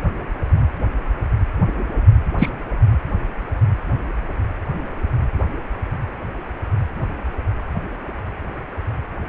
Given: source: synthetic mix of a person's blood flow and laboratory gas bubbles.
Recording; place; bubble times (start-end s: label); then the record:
Doppler ultrasound of blood flow; precordium
2.39-2.49 s: bubbles
From the record:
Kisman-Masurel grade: 113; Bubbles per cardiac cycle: 1 to 2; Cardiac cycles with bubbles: 1 to 10%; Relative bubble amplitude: loud (0.450 to 0.775); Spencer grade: 1 (occasional bubble signal discernible with the cardiac motion signal, with majority of cardiac periods free of bubbles); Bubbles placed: anywhere in the cardiac cycle